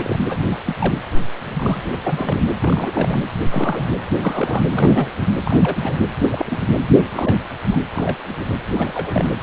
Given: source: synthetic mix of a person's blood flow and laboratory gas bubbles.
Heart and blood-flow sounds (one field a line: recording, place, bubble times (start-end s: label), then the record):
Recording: Doppler ultrasound of blood flow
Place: precordium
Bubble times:
0.00-0.19 s: bubbles
0.28-0.44 s: bubbles
0.47-0.58 s: bubbles
0.66-0.75 s: bubbles
0.80-0.94 s: bubbles
1.45-1.83 s: bubbles
1.91-1.98 s: bubbles
2.04-2.42 s: bubbles
2.62-3.22 s: bubbles
3.50-3.96 s: bubbles
4.10-4.14 s: bubbles
4.20-4.67 s: bubbles
4.70-5.11 s: bubbles
5.20-5.26 s: bubbles
5.43-6.06 s: bubbles
6.22-6.61 s: bubbles
6.97-7.03 s: bubbles
7.13-7.37 s: bubbles
7.70-7.82 s: bubbles
7.93-8.19 s: bubbles
8.28-8.45 s: bubbles
8.66-9.30 s: bubbles
From the record:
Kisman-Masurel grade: 232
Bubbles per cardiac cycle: several, 3 to 8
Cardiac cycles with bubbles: 50 to 99%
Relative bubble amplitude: moderate (0.250 to 0.450)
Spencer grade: 3 (all of the cardiac periods contain showers or single bubble signals, but not dominating or overriding the cardiac motion signals)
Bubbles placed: anywhere in the cardiac cycle